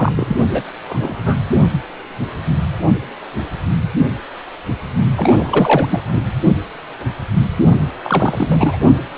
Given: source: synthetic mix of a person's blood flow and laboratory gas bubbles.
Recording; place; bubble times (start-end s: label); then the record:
Doppler ultrasound of blood flow; precordium
0.00-0.12 s: bubbles
0.16-0.37 s: bubbles
0.49-0.62 s: bubbles
0.89-1.37 s: bubbles
5.17-5.99 s: bubbles
6.12-6.20 s: bubbles
8.04-8.78 s: bubbles
From the record:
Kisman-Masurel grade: 333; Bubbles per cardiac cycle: rolling drumbeat, 9 or more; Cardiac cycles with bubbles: 50 to 99%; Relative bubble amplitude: loud (0.450 to 0.775); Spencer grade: 3 (all of the cardiac periods contain showers or single bubble signals, but not dominating or overriding the cardiac motion signals); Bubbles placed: only in the low amplitude regions of the cardiac cycle